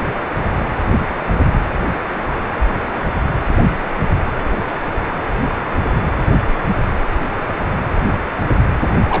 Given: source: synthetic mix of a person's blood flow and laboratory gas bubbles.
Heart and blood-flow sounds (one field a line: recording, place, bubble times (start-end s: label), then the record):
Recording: Doppler ultrasound of blood flow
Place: precordium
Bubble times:
9.08-9.20 s: bubbles
From the record:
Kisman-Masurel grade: 211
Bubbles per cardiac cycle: several, 3 to 8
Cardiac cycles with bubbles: 1 to 10%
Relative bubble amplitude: barely perceptible (0.100 to 0.250)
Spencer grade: 1 (occasional bubble signal discernible with the cardiac motion signal, with majority of cardiac periods free of bubbles)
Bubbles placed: anywhere in the cardiac cycle